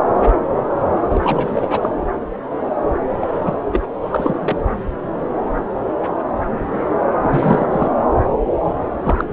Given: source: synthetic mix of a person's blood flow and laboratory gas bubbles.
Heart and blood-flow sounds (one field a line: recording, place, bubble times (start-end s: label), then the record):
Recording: Doppler ultrasound of blood flow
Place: subclavian vein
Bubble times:
1.10-1.89 s: bubbles
3.21-3.56 s: bubbles
3.72-3.88 s: bubbles
4.09-4.57 s: bubbles
7.19-7.92 s: bubbles
9.04-9.25 s: bubbles
From the record:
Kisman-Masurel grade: 332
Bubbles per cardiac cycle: rolling drumbeat, 9 or more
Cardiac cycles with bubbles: 50 to 99%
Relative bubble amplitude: moderate (0.250 to 0.450)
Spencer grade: 3 (all of the cardiac periods contain showers or single bubble signals, but not dominating or overriding the cardiac motion signals)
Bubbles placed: anywhere in the cardiac cycle